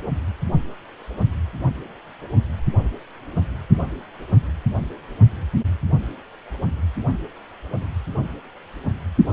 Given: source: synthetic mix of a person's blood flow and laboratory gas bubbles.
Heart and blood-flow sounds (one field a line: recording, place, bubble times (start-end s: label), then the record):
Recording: Doppler ultrasound of blood flow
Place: precordium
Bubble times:
9.29-9.33 s: bubbles
From the record:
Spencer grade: 1 (occasional bubble signal discernible with the cardiac motion signal, with majority of cardiac periods free of bubbles)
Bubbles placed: only in the low amplitude regions of the cardiac cycle